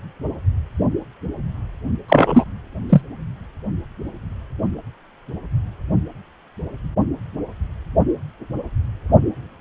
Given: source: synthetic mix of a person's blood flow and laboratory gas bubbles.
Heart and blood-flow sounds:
Doppler ultrasound of blood flow; precordium
2.08-2.44 s: bubbles
2.89-3.01 s: bubbles
From the record:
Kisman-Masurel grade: 213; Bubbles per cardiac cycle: several, 3 to 8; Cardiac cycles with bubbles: 1 to 10%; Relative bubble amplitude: loud (0.450 to 0.775); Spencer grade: 1 (occasional bubble signal discernible with the cardiac motion signal, with majority of cardiac periods free of bubbles); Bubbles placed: only in the low amplitude regions of the cardiac cycle

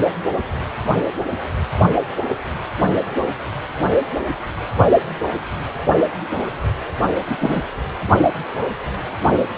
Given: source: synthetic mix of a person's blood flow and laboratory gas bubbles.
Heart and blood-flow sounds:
Doppler ultrasound of blood flow; precordium
7.29-7.63 s: bubbles
From the record:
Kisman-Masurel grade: 113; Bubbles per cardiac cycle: 1 to 2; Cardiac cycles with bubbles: 1 to 10%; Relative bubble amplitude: loud (0.450 to 0.775); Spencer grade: 1 (occasional bubble signal discernible with the cardiac motion signal, with majority of cardiac periods free of bubbles); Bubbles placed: only in the low amplitude regions of the cardiac cycle

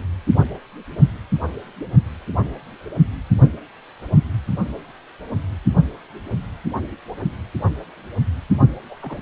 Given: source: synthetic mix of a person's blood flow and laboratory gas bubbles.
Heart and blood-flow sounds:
Doppler ultrasound of blood flow; precordium
8.90-8.96 s: bubbles
9.00-9.22 s: bubbles
From the record:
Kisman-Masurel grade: 221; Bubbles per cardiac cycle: several, 3 to 8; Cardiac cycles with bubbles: 10 to 50%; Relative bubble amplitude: barely perceptible (0.100 to 0.250); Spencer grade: 2 (many but less than half of the cardiac periods contain bubble signals, singularly or in groups); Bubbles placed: only in the low amplitude regions of the cardiac cycle

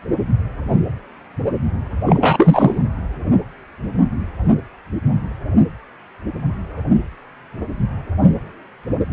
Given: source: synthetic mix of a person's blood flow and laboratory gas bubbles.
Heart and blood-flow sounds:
Doppler ultrasound of blood flow; precordium
2.05-2.82 s: bubbles
From the record:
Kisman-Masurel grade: 213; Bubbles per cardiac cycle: several, 3 to 8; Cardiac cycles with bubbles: 1 to 10%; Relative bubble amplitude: loud (0.450 to 0.775); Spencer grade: 1 (occasional bubble signal discernible with the cardiac motion signal, with majority of cardiac periods free of bubbles); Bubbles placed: anywhere in the cardiac cycle

